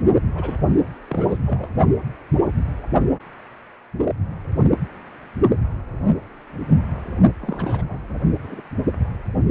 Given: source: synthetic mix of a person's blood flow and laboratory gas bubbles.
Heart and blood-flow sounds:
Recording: Doppler ultrasound of blood flow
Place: precordium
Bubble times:
0.35-0.67 s: bubbles
1.08-1.37 s: bubbles
1.46-1.69 s: bubbles
7.39-7.99 s: bubbles
8.43-8.61 s: bubbles
From the record:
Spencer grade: 2 (many but less than half of the cardiac periods contain bubble signals, singularly or in groups)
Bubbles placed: only in the low amplitude regions of the cardiac cycle

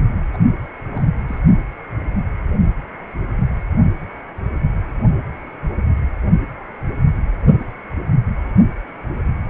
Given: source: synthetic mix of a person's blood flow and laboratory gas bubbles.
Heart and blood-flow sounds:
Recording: Doppler ultrasound of blood flow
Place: precordium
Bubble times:
0.33-0.38 s: bubbles
0.45-0.50 s: bubbles
0.92-1.03 s: bubbles
1.28-1.39 s: bubbles
From the record:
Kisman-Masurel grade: 211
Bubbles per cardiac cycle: several, 3 to 8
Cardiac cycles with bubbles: 1 to 10%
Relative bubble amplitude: barely perceptible (0.100 to 0.250)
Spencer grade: 1 (occasional bubble signal discernible with the cardiac motion signal, with majority of cardiac periods free of bubbles)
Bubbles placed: only in the low amplitude regions of the cardiac cycle

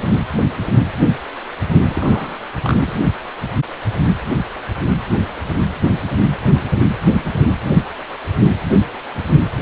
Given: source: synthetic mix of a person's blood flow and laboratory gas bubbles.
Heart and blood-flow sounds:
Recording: Doppler ultrasound of blood flow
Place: precordium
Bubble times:
1.89-2.39 s: bubbles
2.62-2.93 s: bubbles
From the record:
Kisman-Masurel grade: 212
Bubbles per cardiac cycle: several, 3 to 8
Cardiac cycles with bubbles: 1 to 10%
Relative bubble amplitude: moderate (0.250 to 0.450)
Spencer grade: 1 (occasional bubble signal discernible with the cardiac motion signal, with majority of cardiac periods free of bubbles)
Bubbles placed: only in the low amplitude regions of the cardiac cycle

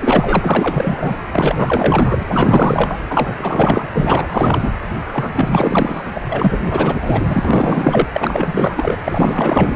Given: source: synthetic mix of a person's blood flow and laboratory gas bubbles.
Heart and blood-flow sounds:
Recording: Doppler ultrasound of blood flow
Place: precordium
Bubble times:
0.00-1.15 s: bubbles
1.32-2.23 s: bubbles
2.30-3.00 s: bubbles
3.08-3.34 s: bubbles
3.38-3.87 s: bubbles
3.92-4.71 s: bubbles
5.13-5.30 s: bubbles
5.33-6.12 s: bubbles
6.14-6.21 s: bubbles
6.30-6.58 s: bubbles
6.61-8.07 s: bubbles
8.12-8.96 s: bubbles
9.04-9.76 s: bubbles
From the record:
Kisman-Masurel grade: 444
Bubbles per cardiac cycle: continuous sound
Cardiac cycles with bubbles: 100%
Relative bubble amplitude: maximal (0.775 to 0.999)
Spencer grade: 4 (maximum detectable bubble signal sounding continuously throughout systole and diastole of every cardiac period, and overriding the amplitude of the normal cardiac signals)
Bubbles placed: anywhere in the cardiac cycle

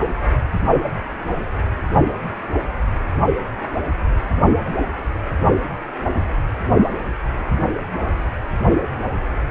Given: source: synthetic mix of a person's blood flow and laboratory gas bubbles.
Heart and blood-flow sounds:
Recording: Doppler ultrasound of blood flow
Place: precordium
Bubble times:
no bubbles
From the record:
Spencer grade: 0 (complete lack of bubble signals)

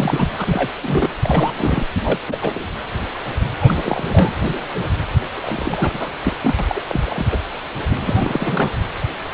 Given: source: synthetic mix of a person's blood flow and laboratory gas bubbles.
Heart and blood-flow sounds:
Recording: Doppler ultrasound of blood flow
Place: precordium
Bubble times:
0.00-0.30 s: bubbles
0.38-0.70 s: bubbles
0.83-1.10 s: bubbles
1.23-1.53 s: bubbles
1.56-1.85 s: bubbles
2.00-2.23 s: bubbles
2.27-2.38 s: bubbles
2.42-2.67 s: bubbles
3.60-4.02 s: bubbles
4.09-4.35 s: bubbles
5.35-6.12 s: bubbles
6.24-6.37 s: bubbles
6.43-6.81 s: bubbles
6.89-7.26 s: bubbles
7.32-7.39 s: bubbles
8.06-8.70 s: bubbles
From the record:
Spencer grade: 3 (all of the cardiac periods contain showers or single bubble signals, but not dominating or overriding the cardiac motion signals)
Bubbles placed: anywhere in the cardiac cycle

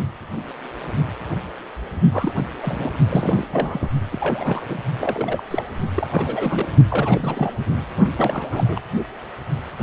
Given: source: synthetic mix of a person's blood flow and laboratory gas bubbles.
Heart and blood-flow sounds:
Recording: Doppler ultrasound of blood flow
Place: precordium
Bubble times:
2.12-2.35 s: bubbles
2.62-2.93 s: bubbles
3.08-3.48 s: bubbles
3.52-3.88 s: bubbles
4.11-4.66 s: bubbles
4.68-4.79 s: bubbles
4.98-5.43 s: bubbles
5.50-5.63 s: bubbles
5.96-6.68 s: bubbles
6.90-7.53 s: bubbles
8.16-8.80 s: bubbles
From the record:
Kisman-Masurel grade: 332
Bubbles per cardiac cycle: rolling drumbeat, 9 or more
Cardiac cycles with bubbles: 50 to 99%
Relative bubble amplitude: moderate (0.250 to 0.450)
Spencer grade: 3 (all of the cardiac periods contain showers or single bubble signals, but not dominating or overriding the cardiac motion signals)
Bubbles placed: only in the low amplitude regions of the cardiac cycle

